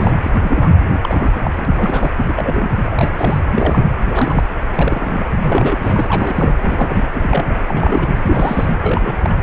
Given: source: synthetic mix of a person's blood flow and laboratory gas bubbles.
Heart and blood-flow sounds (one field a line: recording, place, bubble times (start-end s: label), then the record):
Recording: Doppler ultrasound of blood flow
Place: precordium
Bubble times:
0.00-0.15 s: bubbles
0.22-0.69 s: bubbles
1.01-1.40 s: bubbles
1.44-1.50 s: bubbles
1.56-2.11 s: bubbles
2.27-2.71 s: bubbles
2.85-3.41 s: bubbles
3.56-3.88 s: bubbles
4.09-4.44 s: bubbles
4.68-5.25 s: bubbles
5.43-6.54 s: bubbles
6.61-7.61 s: bubbles
7.68-8.17 s: bubbles
8.21-8.71 s: bubbles
8.81-9.35 s: bubbles
From the record:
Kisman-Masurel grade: 342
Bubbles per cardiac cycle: rolling drumbeat, 9 or more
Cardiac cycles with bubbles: 100%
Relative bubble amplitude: moderate (0.250 to 0.450)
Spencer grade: 3 (all of the cardiac periods contain showers or single bubble signals, but not dominating or overriding the cardiac motion signals)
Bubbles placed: anywhere in the cardiac cycle